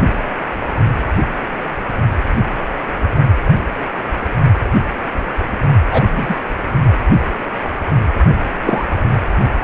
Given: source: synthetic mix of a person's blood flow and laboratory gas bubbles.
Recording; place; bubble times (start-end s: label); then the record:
Doppler ultrasound of blood flow; precordium
5.91-6.07 s: bubbles
6.17-6.36 s: bubbles
8.64-8.85 s: bubbles
From the record:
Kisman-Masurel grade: 123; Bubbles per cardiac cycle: 1 to 2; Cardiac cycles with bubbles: 10 to 50%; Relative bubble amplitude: loud (0.450 to 0.775); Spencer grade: 2 (many but less than half of the cardiac periods contain bubble signals, singularly or in groups); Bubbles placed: only in the low amplitude regions of the cardiac cycle